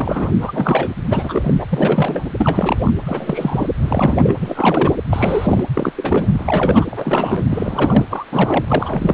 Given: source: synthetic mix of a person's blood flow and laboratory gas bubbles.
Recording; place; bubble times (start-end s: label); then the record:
Doppler ultrasound of blood flow; precordium
0.00-0.33 s: bubbles
0.40-0.93 s: bubbles
1.09-1.54 s: bubbles
1.58-1.66 s: bubbles
1.69-2.33 s: bubbles
2.38-2.93 s: bubbles
3.06-3.68 s: bubbles
3.78-4.34 s: bubbles
4.40-4.96 s: bubbles
5.09-5.64 s: bubbles
5.75-5.92 s: bubbles
5.96-6.85 s: bubbles
6.92-7.45 s: bubbles
7.49-8.06 s: bubbles
8.10-8.25 s: bubbles
8.31-8.65 s: bubbles
8.68-9.13 s: bubbles
From the record:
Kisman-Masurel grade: 342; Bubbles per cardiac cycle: rolling drumbeat, 9 or more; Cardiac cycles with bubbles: 100%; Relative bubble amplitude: moderate (0.250 to 0.450); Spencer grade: 3 (all of the cardiac periods contain showers or single bubble signals, but not dominating or overriding the cardiac motion signals); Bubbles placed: anywhere in the cardiac cycle